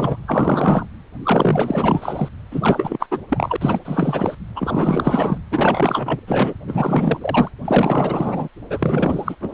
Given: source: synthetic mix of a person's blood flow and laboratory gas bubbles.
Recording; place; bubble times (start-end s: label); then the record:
Doppler ultrasound of blood flow; precordium
0.00-0.23 s: bubbles
0.27-0.85 s: bubbles
1.23-2.29 s: bubbles
2.51-3.07 s: bubbles
3.11-3.19 s: bubbles
3.29-3.56 s: bubbles
3.60-3.79 s: bubbles
3.85-4.35 s: bubbles
4.55-5.38 s: bubbles
5.50-6.20 s: bubbles
6.27-6.54 s: bubbles
6.67-7.18 s: bubbles
7.21-7.50 s: bubbles
7.65-8.48 s: bubbles
8.70-9.36 s: bubbles
9.40-9.54 s: bubbles
From the record:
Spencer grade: 4 (maximum detectable bubble signal sounding continuously throughout systole and diastole of every cardiac period, and overriding the amplitude of the normal cardiac signals); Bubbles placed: anywhere in the cardiac cycle